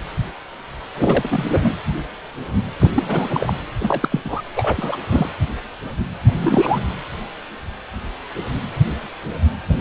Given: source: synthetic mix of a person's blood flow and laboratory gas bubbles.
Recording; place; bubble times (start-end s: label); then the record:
Doppler ultrasound of blood flow; precordium
0.94-1.75 s: bubbles
2.81-2.90 s: bubbles
2.94-3.53 s: bubbles
3.79-4.08 s: bubbles
4.12-4.20 s: bubbles
4.24-4.42 s: bubbles
4.56-4.97 s: bubbles
5.09-5.29 s: bubbles
6.27-6.82 s: bubbles
9.68-9.81 s: bubbles
From the record:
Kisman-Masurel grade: 332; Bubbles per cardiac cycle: rolling drumbeat, 9 or more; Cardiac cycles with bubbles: 50 to 99%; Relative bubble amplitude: moderate (0.250 to 0.450); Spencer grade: 3 (all of the cardiac periods contain showers or single bubble signals, but not dominating or overriding the cardiac motion signals); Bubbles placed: anywhere in the cardiac cycle